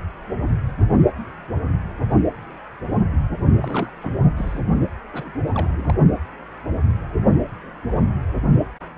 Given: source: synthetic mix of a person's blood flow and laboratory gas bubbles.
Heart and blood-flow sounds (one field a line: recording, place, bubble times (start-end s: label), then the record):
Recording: Doppler ultrasound of blood flow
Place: precordium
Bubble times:
3.54-3.91 s: bubbles
4.01-4.17 s: bubbles
4.37-4.61 s: bubbles
5.12-5.34 s: bubbles
5.48-5.94 s: bubbles
From the record:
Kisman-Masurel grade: 221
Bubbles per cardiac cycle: several, 3 to 8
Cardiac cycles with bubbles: 10 to 50%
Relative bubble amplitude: barely perceptible (0.100 to 0.250)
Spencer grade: 2 (many but less than half of the cardiac periods contain bubble signals, singularly or in groups)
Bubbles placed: only in the low amplitude regions of the cardiac cycle